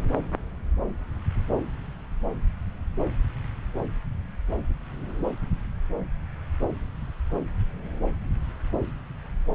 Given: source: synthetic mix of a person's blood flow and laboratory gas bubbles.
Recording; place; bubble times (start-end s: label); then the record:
Doppler ultrasound of blood flow; subclavian vein
no bubbles
From the record:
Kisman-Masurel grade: 000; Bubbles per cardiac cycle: 0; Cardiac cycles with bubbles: 0%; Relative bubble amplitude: no bubbles discernible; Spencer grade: 0 (complete lack of bubble signals)